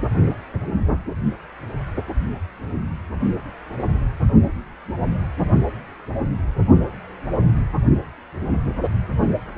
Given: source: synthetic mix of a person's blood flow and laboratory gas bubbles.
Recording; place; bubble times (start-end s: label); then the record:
Doppler ultrasound of blood flow; precordium
no bubbles
From the record:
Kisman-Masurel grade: 000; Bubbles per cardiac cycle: 0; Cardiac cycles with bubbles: 0%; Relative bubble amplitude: no bubbles discernible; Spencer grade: 0 (complete lack of bubble signals)